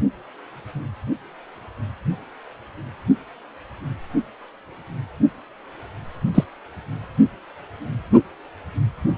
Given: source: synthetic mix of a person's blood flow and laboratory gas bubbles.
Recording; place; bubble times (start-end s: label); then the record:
Doppler ultrasound of blood flow; precordium
6.35-6.44 s: bubbles
From the record:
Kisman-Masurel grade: 123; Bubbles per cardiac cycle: 1 to 2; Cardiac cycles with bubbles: 10 to 50%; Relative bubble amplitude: loud (0.450 to 0.775); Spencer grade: 2 (many but less than half of the cardiac periods contain bubble signals, singularly or in groups); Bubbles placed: only in the low amplitude regions of the cardiac cycle